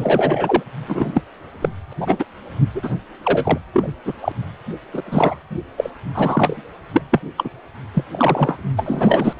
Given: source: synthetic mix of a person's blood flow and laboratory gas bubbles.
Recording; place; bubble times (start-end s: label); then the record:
Doppler ultrasound of blood flow; precordium
0.00-0.63 s: bubbles
0.87-1.21 s: bubbles
1.62-1.69 s: bubbles
1.90-1.93 s: bubbles
1.98-2.25 s: bubbles
2.74-2.94 s: bubbles
3.23-3.58 s: bubbles
3.73-3.94 s: bubbles
4.05-4.14 s: bubbles
4.21-4.33 s: bubbles
4.94-5.02 s: bubbles
5.06-5.39 s: bubbles
5.77-5.90 s: bubbles
6.15-6.62 s: bubbles
6.93-7.02 s: bubbles
7.11-7.21 s: bubbles
7.37-7.50 s: bubbles
7.93-8.04 s: bubbles
8.11-8.57 s: bubbles
8.76-9.33 s: bubbles
From the record:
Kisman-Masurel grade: 243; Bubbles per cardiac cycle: several, 3 to 8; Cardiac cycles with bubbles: 100%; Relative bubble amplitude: loud (0.450 to 0.775); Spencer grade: 3 (all of the cardiac periods contain showers or single bubble signals, but not dominating or overriding the cardiac motion signals); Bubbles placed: anywhere in the cardiac cycle